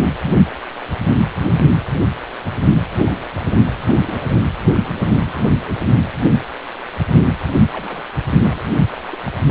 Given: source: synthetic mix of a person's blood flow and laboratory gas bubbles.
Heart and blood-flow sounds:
Doppler ultrasound of blood flow; precordium
2.96-3.18 s: bubbles
3.34-3.44 s: bubbles
3.54-3.62 s: bubbles
3.86-3.98 s: bubbles
4.06-4.44 s: bubbles
4.73-4.78 s: bubbles
4.96-5.55 s: bubbles
5.64-5.76 s: bubbles
7.72-8.03 s: bubbles
8.43-8.61 s: bubbles
8.91-9.02 s: bubbles
9.07-9.17 s: bubbles
9.27-9.32 s: bubbles
From the record:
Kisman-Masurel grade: 221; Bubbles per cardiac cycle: several, 3 to 8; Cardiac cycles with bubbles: 10 to 50%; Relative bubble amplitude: barely perceptible (0.100 to 0.250); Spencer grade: 2 (many but less than half of the cardiac periods contain bubble signals, singularly or in groups); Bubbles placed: anywhere in the cardiac cycle

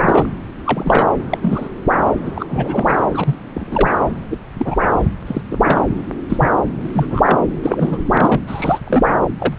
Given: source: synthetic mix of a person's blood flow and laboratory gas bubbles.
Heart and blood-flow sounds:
Doppler ultrasound of blood flow; subclavian vein
0.00-0.29 s: bubbles
0.65-1.08 s: bubbles
1.29-1.38 s: bubbles
1.42-1.69 s: bubbles
2.25-2.32 s: bubbles
2.35-2.46 s: bubbles
2.49-2.96 s: bubbles
3.13-3.35 s: bubbles
3.54-3.92 s: bubbles
4.31-4.38 s: bubbles
4.58-4.78 s: bubbles
5.27-5.42 s: bubbles
5.50-5.81 s: bubbles
6.29-6.49 s: bubbles
6.81-6.89 s: bubbles
6.93-7.22 s: bubbles
7.25-7.39 s: bubbles
7.62-8.41 s: bubbles
8.47-8.79 s: bubbles
8.87-9.08 s: bubbles
9.38-9.54 s: bubbles
From the record:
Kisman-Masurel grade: 242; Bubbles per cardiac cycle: several, 3 to 8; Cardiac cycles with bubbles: 100%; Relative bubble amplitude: moderate (0.250 to 0.450); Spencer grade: 3 (all of the cardiac periods contain showers or single bubble signals, but not dominating or overriding the cardiac motion signals); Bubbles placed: anywhere in the cardiac cycle

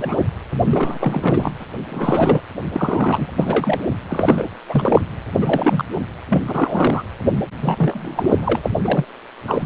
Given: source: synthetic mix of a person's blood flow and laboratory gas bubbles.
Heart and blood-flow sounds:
Doppler ultrasound of blood flow; precordium
0.00-0.23 s: bubbles
0.67-1.52 s: bubbles
1.60-1.66 s: bubbles
1.89-2.40 s: bubbles
2.73-3.32 s: bubbles
3.37-3.80 s: bubbles
4.09-4.44 s: bubbles
4.69-5.01 s: bubbles
5.33-5.85 s: bubbles
5.94-6.02 s: bubbles
6.29-6.42 s: bubbles
6.46-7.03 s: bubbles
7.61-8.70 s: bubbles
8.84-9.04 s: bubbles
9.47-9.66 s: bubbles
From the record:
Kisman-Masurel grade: 342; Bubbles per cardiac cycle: rolling drumbeat, 9 or more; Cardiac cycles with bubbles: 100%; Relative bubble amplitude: moderate (0.250 to 0.450); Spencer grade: 3 (all of the cardiac periods contain showers or single bubble signals, but not dominating or overriding the cardiac motion signals); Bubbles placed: anywhere in the cardiac cycle

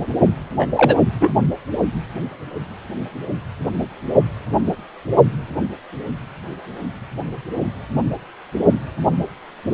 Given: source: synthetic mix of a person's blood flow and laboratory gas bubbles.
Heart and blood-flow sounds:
Doppler ultrasound of blood flow; precordium
0.58-0.67 s: bubbles
0.76-0.94 s: bubbles
1.21-1.30 s: bubbles
From the record:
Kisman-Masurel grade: 213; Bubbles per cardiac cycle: several, 3 to 8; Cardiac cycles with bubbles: 1 to 10%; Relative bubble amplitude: loud (0.450 to 0.775); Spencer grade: 1 (occasional bubble signal discernible with the cardiac motion signal, with majority of cardiac periods free of bubbles); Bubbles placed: only in the low amplitude regions of the cardiac cycle

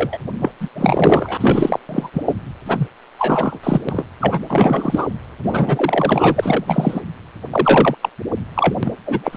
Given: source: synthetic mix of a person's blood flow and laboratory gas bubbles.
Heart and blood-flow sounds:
Doppler ultrasound of blood flow; precordium
0.00-0.18 s: bubbles
0.39-0.51 s: bubbles
0.60-0.69 s: bubbles
0.75-1.38 s: bubbles
1.40-1.79 s: bubbles
1.89-2.09 s: bubbles
2.13-2.23 s: bubbles
2.28-2.33 s: bubbles
2.65-2.87 s: bubbles
3.18-3.59 s: bubbles
3.63-3.81 s: bubbles
3.88-4.04 s: bubbles
4.21-4.41 s: bubbles
4.48-5.07 s: bubbles
5.43-6.64 s: bubbles
6.67-7.01 s: bubbles
7.50-7.95 s: bubbles
8.02-8.09 s: bubbles
8.55-8.74 s: bubbles
8.82-8.94 s: bubbles
9.05-9.37 s: bubbles
From the record:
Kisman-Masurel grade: 243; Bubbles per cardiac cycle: several, 3 to 8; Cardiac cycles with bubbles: 100%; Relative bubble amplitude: loud (0.450 to 0.775); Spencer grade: 3 (all of the cardiac periods contain showers or single bubble signals, but not dominating or overriding the cardiac motion signals); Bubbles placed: anywhere in the cardiac cycle

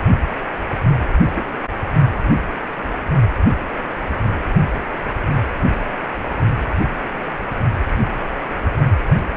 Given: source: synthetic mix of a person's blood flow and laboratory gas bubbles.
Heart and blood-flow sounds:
Doppler ultrasound of blood flow; precordium
1.34-1.44 s: bubbles
1.48-1.57 s: bubbles
3.61-3.66 s: bubbles
From the record:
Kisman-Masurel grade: 121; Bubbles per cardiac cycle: 1 to 2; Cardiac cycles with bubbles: 10 to 50%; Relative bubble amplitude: barely perceptible (0.100 to 0.250); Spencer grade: 2 (many but less than half of the cardiac periods contain bubble signals, singularly or in groups); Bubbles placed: anywhere in the cardiac cycle

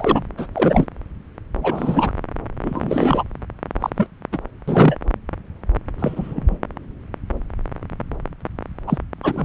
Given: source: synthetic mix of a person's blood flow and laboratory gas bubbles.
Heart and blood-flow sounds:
Doppler ultrasound of blood flow; subclavian vein
0.00-0.23 s: bubbles
0.37-0.47 s: bubbles
0.54-0.85 s: bubbles
1.62-2.11 s: bubbles
2.62-3.23 s: bubbles
3.80-3.90 s: bubbles
3.96-4.07 s: bubbles
4.32-4.38 s: bubbles
4.67-4.96 s: bubbles
5.99-6.58 s: bubbles
8.87-8.98 s: bubbles
9.23-9.45 s: bubbles
From the record:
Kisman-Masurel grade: 232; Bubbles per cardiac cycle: several, 3 to 8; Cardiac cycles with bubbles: 50 to 99%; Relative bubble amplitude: moderate (0.250 to 0.450); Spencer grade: 3 (all of the cardiac periods contain showers or single bubble signals, but not dominating or overriding the cardiac motion signals); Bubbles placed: anywhere in the cardiac cycle

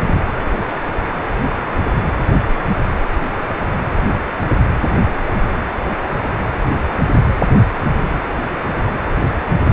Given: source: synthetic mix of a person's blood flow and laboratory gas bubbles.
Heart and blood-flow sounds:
Doppler ultrasound of blood flow; precordium
0.07-0.20 s: bubbles
From the record:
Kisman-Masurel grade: 112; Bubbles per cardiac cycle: 1 to 2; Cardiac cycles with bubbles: 1 to 10%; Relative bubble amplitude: moderate (0.250 to 0.450); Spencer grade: 1 (occasional bubble signal discernible with the cardiac motion signal, with majority of cardiac periods free of bubbles); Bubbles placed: anywhere in the cardiac cycle

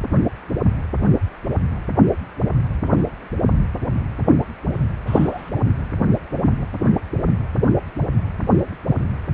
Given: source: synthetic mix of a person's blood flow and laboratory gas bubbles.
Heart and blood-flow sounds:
Doppler ultrasound of blood flow; precordium
5.07-5.51 s: bubbles
From the record:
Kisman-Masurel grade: 112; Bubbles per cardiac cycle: 1 to 2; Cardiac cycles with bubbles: 1 to 10%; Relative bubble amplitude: moderate (0.250 to 0.450); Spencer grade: 1 (occasional bubble signal discernible with the cardiac motion signal, with majority of cardiac periods free of bubbles); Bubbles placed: anywhere in the cardiac cycle

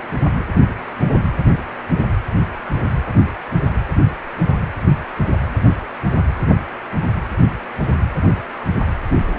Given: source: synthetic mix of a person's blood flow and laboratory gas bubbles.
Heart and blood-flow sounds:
Doppler ultrasound of blood flow; precordium
no bubbles
From the record:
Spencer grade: 0 (complete lack of bubble signals)

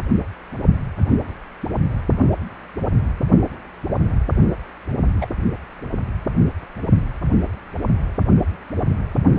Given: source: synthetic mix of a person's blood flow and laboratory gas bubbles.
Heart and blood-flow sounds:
Doppler ultrasound of blood flow; precordium
5.21-5.27 s: bubbles
From the record:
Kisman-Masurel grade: 113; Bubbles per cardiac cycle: 1 to 2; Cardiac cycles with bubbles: 1 to 10%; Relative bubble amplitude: loud (0.450 to 0.775); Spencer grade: 1 (occasional bubble signal discernible with the cardiac motion signal, with majority of cardiac periods free of bubbles); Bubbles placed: only in the low amplitude regions of the cardiac cycle

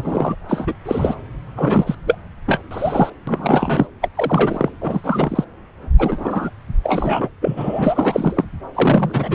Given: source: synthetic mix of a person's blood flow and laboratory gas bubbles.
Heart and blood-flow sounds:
Doppler ultrasound of blood flow; subclavian vein
0.00-0.35 s: bubbles
0.49-0.72 s: bubbles
0.85-1.15 s: bubbles
1.56-1.95 s: bubbles
2.06-2.18 s: bubbles
2.46-2.61 s: bubbles
2.71-3.10 s: bubbles
3.27-3.86 s: bubbles
4.01-4.09 s: bubbles
4.13-4.69 s: bubbles
4.81-5.44 s: bubbles
5.98-6.50 s: bubbles
6.83-7.30 s: bubbles
7.42-8.45 s: bubbles
8.74-9.35 s: bubbles
From the record:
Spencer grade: 3 (all of the cardiac periods contain showers or single bubble signals, but not dominating or overriding the cardiac motion signals); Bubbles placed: anywhere in the cardiac cycle

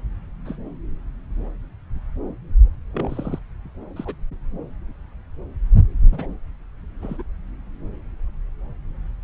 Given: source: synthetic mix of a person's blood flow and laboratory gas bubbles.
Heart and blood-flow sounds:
Doppler ultrasound of blood flow; subclavian vein
0.45-0.56 s: bubbles
2.93-3.39 s: bubbles
3.96-4.15 s: bubbles
6.11-6.27 s: bubbles
7.02-7.22 s: bubbles
From the record:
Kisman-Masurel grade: 121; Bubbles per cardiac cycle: 1 to 2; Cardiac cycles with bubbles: 10 to 50%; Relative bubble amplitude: barely perceptible (0.100 to 0.250); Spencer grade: 2 (many but less than half of the cardiac periods contain bubble signals, singularly or in groups); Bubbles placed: anywhere in the cardiac cycle

